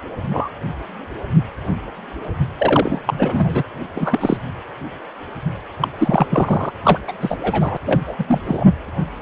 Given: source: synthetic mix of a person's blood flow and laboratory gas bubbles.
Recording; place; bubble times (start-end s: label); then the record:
Doppler ultrasound of blood flow; precordium
0.30-0.49 s: bubbles
2.58-3.00 s: bubbles
3.06-3.63 s: bubbles
3.94-4.37 s: bubbles
5.80-5.88 s: bubbles
5.97-6.26 s: bubbles
6.30-6.72 s: bubbles
6.84-7.00 s: bubbles
7.07-7.12 s: bubbles
7.21-7.77 s: bubbles
7.85-8.02 s: bubbles
8.06-8.14 s: bubbles
8.19-8.24 s: bubbles
8.28-8.40 s: bubbles
8.46-8.65 s: bubbles
From the record:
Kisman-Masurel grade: 333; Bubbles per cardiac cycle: rolling drumbeat, 9 or more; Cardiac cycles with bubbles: 50 to 99%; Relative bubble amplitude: loud (0.450 to 0.775); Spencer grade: 3 (all of the cardiac periods contain showers or single bubble signals, but not dominating or overriding the cardiac motion signals); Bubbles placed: anywhere in the cardiac cycle